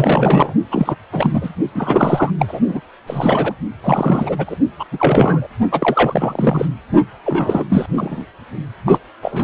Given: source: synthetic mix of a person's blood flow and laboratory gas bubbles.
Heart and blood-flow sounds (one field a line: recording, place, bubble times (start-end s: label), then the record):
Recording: Doppler ultrasound of blood flow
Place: precordium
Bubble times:
0.00-0.54 s: bubbles
0.72-0.96 s: bubbles
1.12-1.50 s: bubbles
1.75-2.30 s: bubbles
2.39-2.59 s: bubbles
2.67-2.81 s: bubbles
3.07-3.54 s: bubbles
3.84-4.56 s: bubbles
4.79-4.84 s: bubbles
4.92-5.47 s: bubbles
5.71-6.68 s: bubbles
7.25-7.64 s: bubbles
7.69-7.86 s: bubbles
7.94-8.25 s: bubbles
8.86-8.98 s: bubbles
9.22-9.44 s: bubbles
From the record:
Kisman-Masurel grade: 333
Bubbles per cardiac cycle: rolling drumbeat, 9 or more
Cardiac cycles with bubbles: 50 to 99%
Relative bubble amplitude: loud (0.450 to 0.775)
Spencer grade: 3 (all of the cardiac periods contain showers or single bubble signals, but not dominating or overriding the cardiac motion signals)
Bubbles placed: only in the low amplitude regions of the cardiac cycle